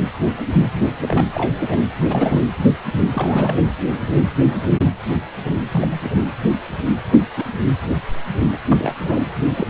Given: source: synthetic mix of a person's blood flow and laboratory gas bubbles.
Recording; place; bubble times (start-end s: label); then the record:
Doppler ultrasound of blood flow; precordium
0.81-0.88 s: bubbles
1.01-1.28 s: bubbles
1.33-1.53 s: bubbles
1.61-1.66 s: bubbles
1.71-1.76 s: bubbles
1.97-2.48 s: bubbles
3.12-3.56 s: bubbles
5.72-5.99 s: bubbles
6.04-6.08 s: bubbles
7.10-7.26 s: bubbles
7.36-7.45 s: bubbles
8.52-8.58 s: bubbles
8.68-8.95 s: bubbles
9.01-9.29 s: bubbles
9.40-9.43 s: bubbles
9.46-9.68 s: bubbles
From the record:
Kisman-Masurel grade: 232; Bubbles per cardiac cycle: several, 3 to 8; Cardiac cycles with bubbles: 50 to 99%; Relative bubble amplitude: moderate (0.250 to 0.450); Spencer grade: 3 (all of the cardiac periods contain showers or single bubble signals, but not dominating or overriding the cardiac motion signals); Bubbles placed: anywhere in the cardiac cycle